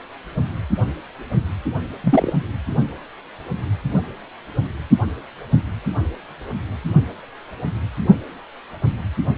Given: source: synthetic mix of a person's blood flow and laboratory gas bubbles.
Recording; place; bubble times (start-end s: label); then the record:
Doppler ultrasound of blood flow; precordium
2.03-2.33 s: bubbles
From the record:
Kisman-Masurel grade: 113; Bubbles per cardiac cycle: 1 to 2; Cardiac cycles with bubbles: 1 to 10%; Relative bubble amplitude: loud (0.450 to 0.775); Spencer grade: 1 (occasional bubble signal discernible with the cardiac motion signal, with majority of cardiac periods free of bubbles); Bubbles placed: only in the low amplitude regions of the cardiac cycle